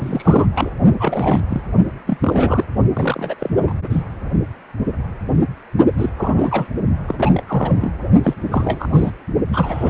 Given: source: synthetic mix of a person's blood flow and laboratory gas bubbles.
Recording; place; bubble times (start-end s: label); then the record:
Doppler ultrasound of blood flow; precordium
0.01-0.47 s: bubbles
0.55-0.70 s: bubbles
0.99-1.40 s: bubbles
1.49-1.61 s: bubbles
2.06-2.17 s: bubbles
2.20-2.65 s: bubbles
2.94-3.35 s: bubbles
3.39-3.50 s: bubbles
3.59-3.73 s: bubbles
3.84-4.03 s: bubbles
5.97-6.09 s: bubbles
6.17-6.67 s: bubbles
7.08-7.15 s: bubbles
7.18-7.42 s: bubbles
7.47-7.91 s: bubbles
8.24-8.35 s: bubbles
8.43-9.12 s: bubbles
9.53-9.90 s: bubbles
From the record:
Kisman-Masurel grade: 332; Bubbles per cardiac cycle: rolling drumbeat, 9 or more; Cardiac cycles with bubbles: 50 to 99%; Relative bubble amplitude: moderate (0.250 to 0.450); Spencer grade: 3 (all of the cardiac periods contain showers or single bubble signals, but not dominating or overriding the cardiac motion signals); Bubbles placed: only in the low amplitude regions of the cardiac cycle